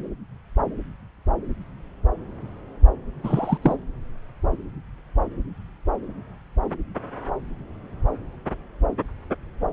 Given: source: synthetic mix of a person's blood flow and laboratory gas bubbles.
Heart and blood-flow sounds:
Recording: Doppler ultrasound of blood flow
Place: subclavian vein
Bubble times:
3.23-3.58 s: bubbles
3.62-3.75 s: bubbles
From the record:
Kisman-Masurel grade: 212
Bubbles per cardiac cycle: several, 3 to 8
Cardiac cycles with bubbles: 1 to 10%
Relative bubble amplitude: moderate (0.250 to 0.450)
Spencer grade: 1 (occasional bubble signal discernible with the cardiac motion signal, with majority of cardiac periods free of bubbles)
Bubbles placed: anywhere in the cardiac cycle

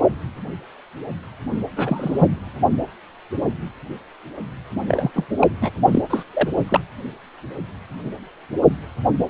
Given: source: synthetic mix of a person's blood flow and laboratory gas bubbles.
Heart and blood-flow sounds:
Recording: Doppler ultrasound of blood flow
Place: precordium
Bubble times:
1.76-2.31 s: bubbles
4.88-5.11 s: bubbles
5.14-5.26 s: bubbles
5.41-5.47 s: bubbles
5.61-5.70 s: bubbles
5.91-6.02 s: bubbles
6.09-6.23 s: bubbles
6.33-6.49 s: bubbles
6.68-6.80 s: bubbles
From the record:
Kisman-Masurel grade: 222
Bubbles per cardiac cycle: several, 3 to 8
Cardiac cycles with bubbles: 10 to 50%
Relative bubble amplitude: moderate (0.250 to 0.450)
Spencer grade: 2 (many but less than half of the cardiac periods contain bubble signals, singularly or in groups)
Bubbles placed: only in the low amplitude regions of the cardiac cycle

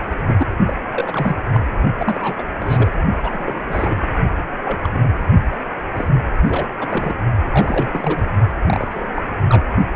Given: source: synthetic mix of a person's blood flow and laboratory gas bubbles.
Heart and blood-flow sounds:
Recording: Doppler ultrasound of blood flow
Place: precordium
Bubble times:
0.26-0.47 s: bubbles
0.66-0.73 s: bubbles
0.91-1.36 s: bubbles
1.52-1.60 s: bubbles
1.98-2.42 s: bubbles
2.60-2.90 s: bubbles
3.22-3.98 s: bubbles
4.64-4.89 s: bubbles
4.93-5.04 s: bubbles
5.96-6.08 s: bubbles
6.43-6.68 s: bubbles
6.79-7.16 s: bubbles
7.51-8.23 s: bubbles
8.64-9.05 s: bubbles
9.14-9.22 s: bubbles
9.49-9.62 s: bubbles
9.94-9.96 s: bubbles
From the record:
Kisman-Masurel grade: 242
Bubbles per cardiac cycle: several, 3 to 8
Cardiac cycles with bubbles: 100%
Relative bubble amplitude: moderate (0.250 to 0.450)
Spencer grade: 3 (all of the cardiac periods contain showers or single bubble signals, but not dominating or overriding the cardiac motion signals)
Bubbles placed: only in the low amplitude regions of the cardiac cycle

